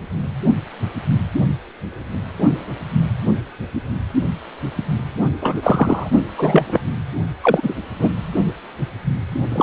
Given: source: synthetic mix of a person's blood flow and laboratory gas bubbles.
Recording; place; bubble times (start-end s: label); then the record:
Doppler ultrasound of blood flow; precordium
5.41-6.09 s: bubbles
6.38-6.63 s: bubbles
6.67-6.81 s: bubbles
7.42-7.74 s: bubbles
7.99-8.09 s: bubbles
9.50-9.63 s: bubbles
From the record:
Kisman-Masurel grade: 223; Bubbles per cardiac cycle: several, 3 to 8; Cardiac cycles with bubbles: 10 to 50%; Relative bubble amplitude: loud (0.450 to 0.775); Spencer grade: 2 (many but less than half of the cardiac periods contain bubble signals, singularly or in groups); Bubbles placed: only in the low amplitude regions of the cardiac cycle